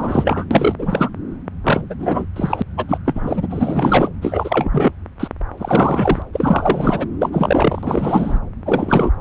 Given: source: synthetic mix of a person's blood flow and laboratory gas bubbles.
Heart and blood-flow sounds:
Doppler ultrasound of blood flow; subclavian vein
0.00-0.44 s: bubbles
0.51-0.75 s: bubbles
0.78-1.10 s: bubbles
1.63-1.81 s: bubbles
1.90-1.95 s: bubbles
1.99-2.25 s: bubbles
2.36-2.62 s: bubbles
2.77-2.85 s: bubbles
2.88-2.98 s: bubbles
3.05-4.09 s: bubbles
4.22-4.92 s: bubbles
5.20-5.28 s: bubbles
5.58-6.22 s: bubbles
6.33-7.07 s: bubbles
7.22-7.29 s: bubbles
7.32-8.39 s: bubbles
8.65-9.12 s: bubbles
From the record:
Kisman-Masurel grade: 343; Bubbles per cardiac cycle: rolling drumbeat, 9 or more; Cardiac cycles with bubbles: 100%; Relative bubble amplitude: loud (0.450 to 0.775); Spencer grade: 3 (all of the cardiac periods contain showers or single bubble signals, but not dominating or overriding the cardiac motion signals); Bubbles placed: anywhere in the cardiac cycle

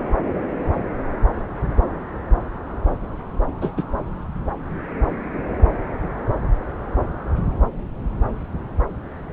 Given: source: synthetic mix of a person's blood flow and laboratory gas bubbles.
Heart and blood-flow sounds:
Doppler ultrasound of blood flow; subclavian vein
3.61-3.71 s: bubbles
3.77-3.83 s: bubbles
From the record:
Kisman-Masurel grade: 113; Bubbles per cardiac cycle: 1 to 2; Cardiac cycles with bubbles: 1 to 10%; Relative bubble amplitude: loud (0.450 to 0.775); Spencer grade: 1 (occasional bubble signal discernible with the cardiac motion signal, with majority of cardiac periods free of bubbles); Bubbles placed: anywhere in the cardiac cycle

